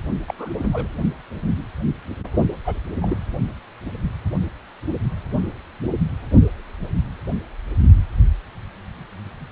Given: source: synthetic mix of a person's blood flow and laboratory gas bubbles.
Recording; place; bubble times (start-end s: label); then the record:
Doppler ultrasound of blood flow; precordium
0.28-0.33 s: bubbles
0.38-0.68 s: bubbles
0.73-0.87 s: bubbles
2.65-2.79 s: bubbles
3.02-3.18 s: bubbles
From the record:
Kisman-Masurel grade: 221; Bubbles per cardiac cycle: several, 3 to 8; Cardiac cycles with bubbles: 10 to 50%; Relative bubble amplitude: barely perceptible (0.100 to 0.250); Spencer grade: 2 (many but less than half of the cardiac periods contain bubble signals, singularly or in groups); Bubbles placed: only in the low amplitude regions of the cardiac cycle